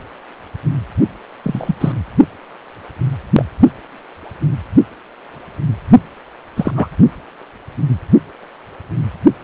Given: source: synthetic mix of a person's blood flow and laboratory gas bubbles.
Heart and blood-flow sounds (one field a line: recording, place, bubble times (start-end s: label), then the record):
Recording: Doppler ultrasound of blood flow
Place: precordium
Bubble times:
1.43-1.74 s: bubbles
1.80-1.92 s: bubbles
3.36-3.45 s: bubbles
6.56-6.71 s: bubbles
6.75-6.89 s: bubbles
From the record:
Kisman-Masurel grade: 123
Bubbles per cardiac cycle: 1 to 2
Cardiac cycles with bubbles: 10 to 50%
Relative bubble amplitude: loud (0.450 to 0.775)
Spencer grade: 2 (many but less than half of the cardiac periods contain bubble signals, singularly or in groups)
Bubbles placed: only in the low amplitude regions of the cardiac cycle